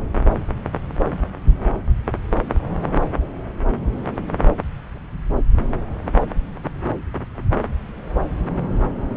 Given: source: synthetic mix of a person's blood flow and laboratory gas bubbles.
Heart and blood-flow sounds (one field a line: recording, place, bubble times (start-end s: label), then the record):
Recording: Doppler ultrasound of blood flow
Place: subclavian vein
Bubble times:
no bubbles
From the record:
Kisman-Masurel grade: 000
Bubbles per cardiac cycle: 0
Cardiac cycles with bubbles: 0%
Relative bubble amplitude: no bubbles discernible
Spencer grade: 0 (complete lack of bubble signals)